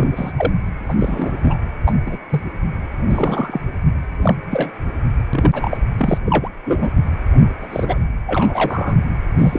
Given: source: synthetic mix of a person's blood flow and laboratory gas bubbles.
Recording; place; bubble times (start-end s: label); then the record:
Doppler ultrasound of blood flow; precordium
0.00-0.32 s: bubbles
0.38-0.52 s: bubbles
0.89-0.95 s: bubbles
0.98-1.31 s: bubbles
1.36-1.58 s: bubbles
1.85-1.93 s: bubbles
2.06-2.18 s: bubbles
2.30-2.41 s: bubbles
2.46-2.51 s: bubbles
3.08-3.60 s: bubbles
4.23-4.34 s: bubbles
4.50-4.71 s: bubbles
5.33-5.78 s: bubbles
5.98-6.18 s: bubbles
6.25-6.49 s: bubbles
6.65-6.91 s: bubbles
7.50-8.04 s: bubbles
8.26-8.97 s: bubbles
9.38-9.59 s: bubbles
From the record:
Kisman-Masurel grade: 242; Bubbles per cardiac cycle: several, 3 to 8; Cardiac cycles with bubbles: 100%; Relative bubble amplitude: moderate (0.250 to 0.450); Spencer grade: 3 (all of the cardiac periods contain showers or single bubble signals, but not dominating or overriding the cardiac motion signals); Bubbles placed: anywhere in the cardiac cycle